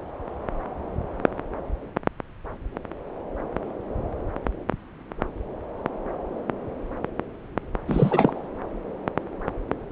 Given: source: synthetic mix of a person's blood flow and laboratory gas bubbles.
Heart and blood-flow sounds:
Doppler ultrasound of blood flow; subclavian vein
7.88-8.46 s: bubbles
From the record:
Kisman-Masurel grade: 212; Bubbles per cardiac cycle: several, 3 to 8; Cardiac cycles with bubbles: 1 to 10%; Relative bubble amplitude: moderate (0.250 to 0.450); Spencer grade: 1 (occasional bubble signal discernible with the cardiac motion signal, with majority of cardiac periods free of bubbles); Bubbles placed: anywhere in the cardiac cycle

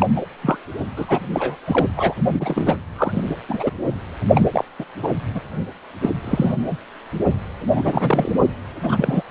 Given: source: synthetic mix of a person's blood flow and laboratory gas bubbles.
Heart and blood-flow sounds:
Doppler ultrasound of blood flow; precordium
0.00-0.06 s: bubbles
0.15-0.26 s: bubbles
0.42-0.57 s: bubbles
0.96-1.20 s: bubbles
1.33-1.56 s: bubbles
1.66-1.86 s: bubbles
1.97-2.14 s: bubbles
2.40-2.77 s: bubbles
2.95-3.35 s: bubbles
3.48-3.70 s: bubbles
4.35-4.47 s: bubbles
4.52-4.65 s: bubbles
4.79-4.85 s: bubbles
5.03-5.10 s: bubbles
5.35-5.40 s: bubbles
6.01-6.10 s: bubbles
6.24-6.77 s: bubbles
7.75-8.31 s: bubbles
8.83-9.23 s: bubbles
From the record:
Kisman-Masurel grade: 242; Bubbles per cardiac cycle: several, 3 to 8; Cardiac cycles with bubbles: 100%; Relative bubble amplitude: moderate (0.250 to 0.450); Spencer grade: 3 (all of the cardiac periods contain showers or single bubble signals, but not dominating or overriding the cardiac motion signals); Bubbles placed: only in the low amplitude regions of the cardiac cycle

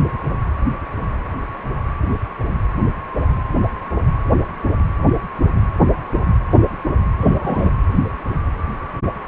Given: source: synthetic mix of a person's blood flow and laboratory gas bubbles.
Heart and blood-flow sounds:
Doppler ultrasound of blood flow; precordium
7.21-7.70 s: bubbles
From the record:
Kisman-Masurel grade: 113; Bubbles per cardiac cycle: 1 to 2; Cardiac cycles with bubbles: 1 to 10%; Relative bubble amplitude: loud (0.450 to 0.775); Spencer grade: 1 (occasional bubble signal discernible with the cardiac motion signal, with majority of cardiac periods free of bubbles); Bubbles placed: anywhere in the cardiac cycle

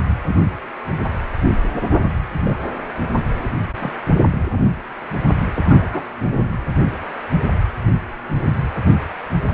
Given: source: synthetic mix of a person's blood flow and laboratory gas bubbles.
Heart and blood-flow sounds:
Doppler ultrasound of blood flow; precordium
0.26-0.36 s: bubbles
2.45-2.56 s: bubbles
3.35-3.53 s: bubbles
3.80-3.94 s: bubbles
5.55-6.04 s: bubbles
From the record:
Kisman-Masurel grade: 122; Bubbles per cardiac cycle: 1 to 2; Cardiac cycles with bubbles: 10 to 50%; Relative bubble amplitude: moderate (0.250 to 0.450); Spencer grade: 2 (many but less than half of the cardiac periods contain bubble signals, singularly or in groups); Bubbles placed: anywhere in the cardiac cycle

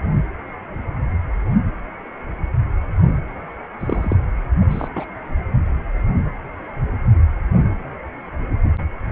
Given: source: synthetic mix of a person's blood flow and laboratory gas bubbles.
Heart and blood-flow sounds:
Doppler ultrasound of blood flow; precordium
3.80-4.17 s: bubbles
4.70-4.88 s: bubbles
4.95-5.05 s: bubbles
From the record:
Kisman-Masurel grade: 122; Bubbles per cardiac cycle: 1 to 2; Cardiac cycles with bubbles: 10 to 50%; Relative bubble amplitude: moderate (0.250 to 0.450); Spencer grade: 2 (many but less than half of the cardiac periods contain bubble signals, singularly or in groups); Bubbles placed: anywhere in the cardiac cycle

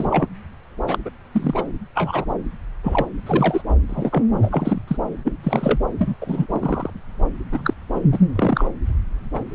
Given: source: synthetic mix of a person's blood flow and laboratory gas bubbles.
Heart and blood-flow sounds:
Doppler ultrasound of blood flow; subclavian vein
0.00-0.28 s: bubbles
0.88-0.97 s: bubbles
1.05-1.10 s: bubbles
1.32-1.63 s: bubbles
1.94-2.25 s: bubbles
2.83-3.06 s: bubbles
3.26-3.62 s: bubbles
3.69-3.74 s: bubbles
3.89-4.23 s: bubbles
4.42-4.81 s: bubbles
4.88-4.97 s: bubbles
5.24-5.32 s: bubbles
5.43-5.79 s: bubbles
5.99-6.14 s: bubbles
6.21-6.46 s: bubbles
6.50-6.90 s: bubbles
7.52-7.74 s: bubbles
7.90-8.00 s: bubbles
8.12-8.19 s: bubbles
8.36-8.66 s: bubbles
9.33-9.44 s: bubbles
From the record:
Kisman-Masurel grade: 242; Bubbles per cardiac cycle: several, 3 to 8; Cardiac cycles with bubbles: 100%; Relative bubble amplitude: moderate (0.250 to 0.450); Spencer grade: 3 (all of the cardiac periods contain showers or single bubble signals, but not dominating or overriding the cardiac motion signals); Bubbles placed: anywhere in the cardiac cycle

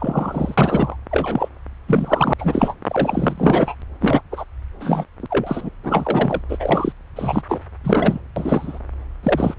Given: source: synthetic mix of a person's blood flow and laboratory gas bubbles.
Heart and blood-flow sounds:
Doppler ultrasound of blood flow; subclavian vein
0.00-0.96 s: bubbles
1.11-1.48 s: bubbles
1.88-2.33 s: bubbles
2.39-2.75 s: bubbles
2.90-3.75 s: bubbles
4.00-4.21 s: bubbles
4.32-4.45 s: bubbles
4.80-5.04 s: bubbles
5.20-5.26 s: bubbles
5.30-5.70 s: bubbles
5.83-6.41 s: bubbles
6.49-6.92 s: bubbles
7.16-7.42 s: bubbles
7.49-7.60 s: bubbles
7.83-8.19 s: bubbles
8.36-8.79 s: bubbles
9.22-9.54 s: bubbles
From the record:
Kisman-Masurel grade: 233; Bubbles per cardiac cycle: several, 3 to 8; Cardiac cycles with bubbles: 50 to 99%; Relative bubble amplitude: loud (0.450 to 0.775); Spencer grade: 3 (all of the cardiac periods contain showers or single bubble signals, but not dominating or overriding the cardiac motion signals); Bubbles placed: anywhere in the cardiac cycle

